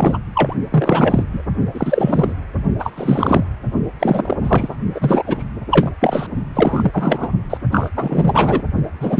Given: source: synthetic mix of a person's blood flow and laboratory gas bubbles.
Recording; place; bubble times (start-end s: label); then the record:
Doppler ultrasound of blood flow; precordium
0.00-0.18 s: bubbles
0.34-0.54 s: bubbles
0.70-1.23 s: bubbles
1.32-1.43 s: bubbles
1.74-2.33 s: bubbles
2.78-3.44 s: bubbles
3.99-4.37 s: bubbles
4.43-4.79 s: bubbles
4.94-5.23 s: bubbles
5.25-5.44 s: bubbles
5.71-5.92 s: bubbles
6.00-6.27 s: bubbles
6.54-6.91 s: bubbles
6.94-7.29 s: bubbles
7.50-7.58 s: bubbles
7.71-7.89 s: bubbles
7.96-8.62 s: bubbles
9.00-9.20 s: bubbles
From the record:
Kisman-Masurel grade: 343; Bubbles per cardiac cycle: rolling drumbeat, 9 or more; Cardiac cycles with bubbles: 100%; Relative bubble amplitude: loud (0.450 to 0.775); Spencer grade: 3 (all of the cardiac periods contain showers or single bubble signals, but not dominating or overriding the cardiac motion signals); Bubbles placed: only in the low amplitude regions of the cardiac cycle